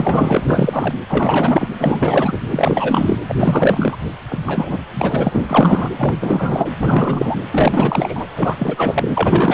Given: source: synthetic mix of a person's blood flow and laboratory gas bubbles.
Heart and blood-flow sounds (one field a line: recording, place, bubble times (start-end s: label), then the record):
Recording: Doppler ultrasound of blood flow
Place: precordium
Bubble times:
0.00-0.42 s: bubbles
0.48-0.94 s: bubbles
1.09-1.68 s: bubbles
1.78-2.39 s: bubbles
2.50-3.17 s: bubbles
3.28-3.97 s: bubbles
4.29-4.38 s: bubbles
4.46-4.79 s: bubbles
4.94-5.46 s: bubbles
5.50-5.90 s: bubbles
5.97-6.13 s: bubbles
6.20-6.69 s: bubbles
6.78-7.36 s: bubbles
7.50-8.28 s: bubbles
8.35-9.54 s: bubbles
From the record:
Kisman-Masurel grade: 444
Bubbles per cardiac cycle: continuous sound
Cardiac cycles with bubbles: 100%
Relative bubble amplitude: maximal (0.775 to 0.999)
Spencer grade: 4 (maximum detectable bubble signal sounding continuously throughout systole and diastole of every cardiac period, and overriding the amplitude of the normal cardiac signals)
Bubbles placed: anywhere in the cardiac cycle